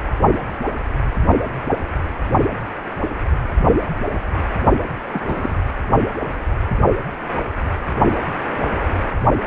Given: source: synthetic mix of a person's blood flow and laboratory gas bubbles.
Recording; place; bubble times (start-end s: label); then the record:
Doppler ultrasound of blood flow; precordium
5.12-5.58 s: bubbles
From the record:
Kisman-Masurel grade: 112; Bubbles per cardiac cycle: 1 to 2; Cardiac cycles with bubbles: 1 to 10%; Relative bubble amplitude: moderate (0.250 to 0.450); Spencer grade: 1 (occasional bubble signal discernible with the cardiac motion signal, with majority of cardiac periods free of bubbles); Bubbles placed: only in the low amplitude regions of the cardiac cycle